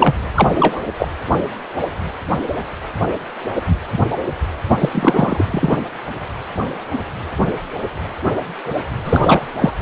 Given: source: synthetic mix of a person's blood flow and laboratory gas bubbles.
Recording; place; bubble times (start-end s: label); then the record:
Doppler ultrasound of blood flow; precordium
0.00-0.14 s: bubbles
0.34-0.48 s: bubbles
0.54-0.80 s: bubbles
0.97-1.08 s: bubbles
4.79-4.90 s: bubbles
4.92-5.46 s: bubbles
5.51-5.79 s: bubbles
9.04-9.51 s: bubbles
9.57-9.71 s: bubbles
9.79-9.82 s: bubbles
From the record:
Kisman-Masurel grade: 223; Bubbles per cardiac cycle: several, 3 to 8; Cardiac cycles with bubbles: 10 to 50%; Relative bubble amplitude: loud (0.450 to 0.775); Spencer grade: 2 (many but less than half of the cardiac periods contain bubble signals, singularly or in groups); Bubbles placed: anywhere in the cardiac cycle